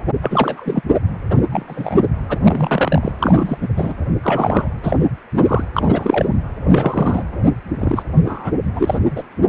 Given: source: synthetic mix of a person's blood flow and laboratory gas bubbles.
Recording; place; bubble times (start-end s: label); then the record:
Doppler ultrasound of blood flow; precordium
0.21-0.81 s: bubbles
1.29-1.35 s: bubbles
1.51-2.04 s: bubbles
2.29-2.38 s: bubbles
2.43-3.12 s: bubbles
3.19-3.58 s: bubbles
3.62-3.68 s: bubbles
3.77-3.94 s: bubbles
4.22-4.68 s: bubbles
4.83-5.07 s: bubbles
5.33-5.65 s: bubbles
5.76-6.35 s: bubbles
6.64-7.24 s: bubbles
7.79-8.03 s: bubbles
8.25-8.51 s: bubbles
8.75-8.99 s: bubbles
9.15-9.23 s: bubbles
From the record:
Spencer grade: 3 (all of the cardiac periods contain showers or single bubble signals, but not dominating or overriding the cardiac motion signals); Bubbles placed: anywhere in the cardiac cycle